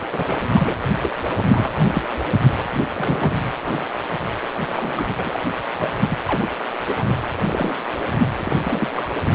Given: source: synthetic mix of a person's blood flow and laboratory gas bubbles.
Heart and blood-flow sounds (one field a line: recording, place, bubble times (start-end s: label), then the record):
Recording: Doppler ultrasound of blood flow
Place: precordium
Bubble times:
0.12-0.41 s: bubbles
0.54-0.76 s: bubbles
0.93-0.98 s: bubbles
1.02-1.10 s: bubbles
1.36-1.43 s: bubbles
1.48-2.02 s: bubbles
2.94-3.51 s: bubbles
3.64-3.84 s: bubbles
4.65-5.05 s: bubbles
5.17-5.42 s: bubbles
5.75-5.97 s: bubbles
6.10-6.19 s: bubbles
6.26-6.49 s: bubbles
6.73-6.78 s: bubbles
6.86-7.04 s: bubbles
7.46-7.75 s: bubbles
8.38-8.91 s: bubbles
8.93-9.09 s: bubbles
From the record:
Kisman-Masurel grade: 242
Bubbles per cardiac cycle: several, 3 to 8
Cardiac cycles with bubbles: 100%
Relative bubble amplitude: moderate (0.250 to 0.450)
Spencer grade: 3 (all of the cardiac periods contain showers or single bubble signals, but not dominating or overriding the cardiac motion signals)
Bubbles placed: anywhere in the cardiac cycle